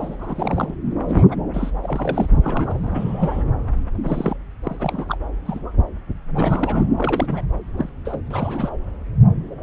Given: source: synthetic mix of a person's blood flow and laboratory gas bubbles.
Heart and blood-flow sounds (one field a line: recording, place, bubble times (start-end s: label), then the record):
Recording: Doppler ultrasound of blood flow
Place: subclavian vein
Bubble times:
0.00-0.16 s: bubbles
0.20-0.74 s: bubbles
1.08-1.24 s: bubbles
1.31-1.35 s: bubbles
1.53-1.71 s: bubbles
1.83-2.39 s: bubbles
2.42-3.44 s: bubbles
4.03-4.37 s: bubbles
4.63-5.17 s: bubbles
5.45-5.59 s: bubbles
6.35-6.84 s: bubbles
6.96-7.41 s: bubbles
7.77-7.89 s: bubbles
8.04-8.20 s: bubbles
8.30-8.70 s: bubbles
From the record:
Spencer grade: 3 (all of the cardiac periods contain showers or single bubble signals, but not dominating or overriding the cardiac motion signals)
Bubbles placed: anywhere in the cardiac cycle